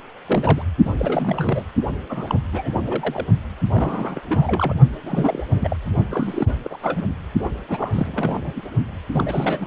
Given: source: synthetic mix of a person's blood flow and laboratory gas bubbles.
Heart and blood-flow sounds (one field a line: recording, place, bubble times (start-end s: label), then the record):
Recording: Doppler ultrasound of blood flow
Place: precordium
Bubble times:
0.27-0.62 s: bubbles
0.85-0.92 s: bubbles
0.98-1.64 s: bubbles
2.10-2.40 s: bubbles
2.52-2.69 s: bubbles
2.73-3.27 s: bubbles
3.73-4.21 s: bubbles
4.28-4.73 s: bubbles
5.02-5.44 s: bubbles
5.48-5.76 s: bubbles
6.10-6.56 s: bubbles
6.64-6.77 s: bubbles
6.82-7.03 s: bubbles
7.45-7.50 s: bubbles
7.68-8.62 s: bubbles
9.13-9.67 s: bubbles
From the record:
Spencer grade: 3 (all of the cardiac periods contain showers or single bubble signals, but not dominating or overriding the cardiac motion signals)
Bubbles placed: only in the low amplitude regions of the cardiac cycle